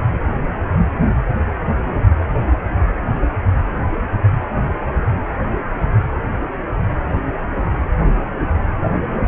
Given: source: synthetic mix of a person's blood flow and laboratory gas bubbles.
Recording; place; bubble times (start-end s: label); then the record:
Doppler ultrasound of blood flow; precordium
no bubbles
From the record:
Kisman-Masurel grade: 000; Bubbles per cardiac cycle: 0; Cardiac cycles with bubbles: 0%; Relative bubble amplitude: no bubbles discernible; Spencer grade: 0 (complete lack of bubble signals)